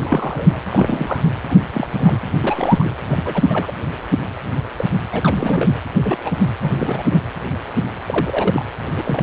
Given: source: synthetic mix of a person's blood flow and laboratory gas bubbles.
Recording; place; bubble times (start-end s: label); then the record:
Doppler ultrasound of blood flow; precordium
0.00-0.58 s: bubbles
0.65-1.22 s: bubbles
1.41-1.58 s: bubbles
1.60-2.21 s: bubbles
2.43-2.96 s: bubbles
3.08-3.19 s: bubbles
3.25-3.72 s: bubbles
4.77-4.85 s: bubbles
5.12-5.75 s: bubbles
6.04-6.20 s: bubbles
6.24-6.32 s: bubbles
6.60-7.22 s: bubbles
8.06-8.65 s: bubbles
8.95-9.23 s: bubbles
From the record:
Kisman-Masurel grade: 232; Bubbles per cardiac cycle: several, 3 to 8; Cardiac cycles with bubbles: 50 to 99%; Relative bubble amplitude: moderate (0.250 to 0.450); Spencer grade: 3 (all of the cardiac periods contain showers or single bubble signals, but not dominating or overriding the cardiac motion signals); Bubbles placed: anywhere in the cardiac cycle